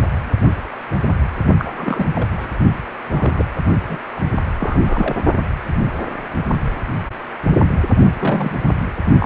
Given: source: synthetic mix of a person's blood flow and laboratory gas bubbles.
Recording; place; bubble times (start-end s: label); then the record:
Doppler ultrasound of blood flow; precordium
1.58-2.06 s: bubbles
2.15-2.59 s: bubbles
3.11-3.45 s: bubbles
3.88-4.00 s: bubbles
4.16-4.21 s: bubbles
4.59-5.16 s: bubbles
8.19-8.52 s: bubbles
9.19-9.25 s: bubbles
From the record:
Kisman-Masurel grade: 232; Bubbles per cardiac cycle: several, 3 to 8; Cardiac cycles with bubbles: 50 to 99%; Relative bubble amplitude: moderate (0.250 to 0.450); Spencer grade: 3 (all of the cardiac periods contain showers or single bubble signals, but not dominating or overriding the cardiac motion signals); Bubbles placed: only in the low amplitude regions of the cardiac cycle